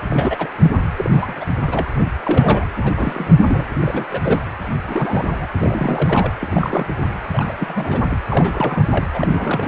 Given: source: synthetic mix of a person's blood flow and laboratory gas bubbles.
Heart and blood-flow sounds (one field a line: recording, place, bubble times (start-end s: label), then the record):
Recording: Doppler ultrasound of blood flow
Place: precordium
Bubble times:
0.09-0.48 s: bubbles
0.62-0.72 s: bubbles
0.97-1.34 s: bubbles
1.40-1.45 s: bubbles
1.67-1.86 s: bubbles
1.99-2.04 s: bubbles
2.24-2.66 s: bubbles
2.83-3.30 s: bubbles
3.38-3.65 s: bubbles
3.81-4.06 s: bubbles
4.11-4.41 s: bubbles
4.88-5.48 s: bubbles
5.58-6.33 s: bubbles
6.42-6.86 s: bubbles
6.88-6.94 s: bubbles
7.33-7.52 s: bubbles
7.60-8.05 s: bubbles
8.09-8.18 s: bubbles
8.29-9.05 s: bubbles
9.13-9.68 s: bubbles
From the record:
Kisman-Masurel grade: 342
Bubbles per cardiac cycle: rolling drumbeat, 9 or more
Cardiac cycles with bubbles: 100%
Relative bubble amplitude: moderate (0.250 to 0.450)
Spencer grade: 3 (all of the cardiac periods contain showers or single bubble signals, but not dominating or overriding the cardiac motion signals)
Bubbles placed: anywhere in the cardiac cycle